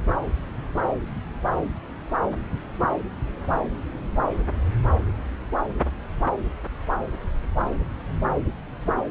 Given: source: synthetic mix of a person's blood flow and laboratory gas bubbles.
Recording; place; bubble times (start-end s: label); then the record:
Doppler ultrasound of blood flow; subclavian vein
9.08-9.11 s: bubbles
From the record:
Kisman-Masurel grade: 211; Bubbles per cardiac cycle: several, 3 to 8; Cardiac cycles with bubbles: 1 to 10%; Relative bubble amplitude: barely perceptible (0.100 to 0.250); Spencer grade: 1 (occasional bubble signal discernible with the cardiac motion signal, with majority of cardiac periods free of bubbles); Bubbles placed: anywhere in the cardiac cycle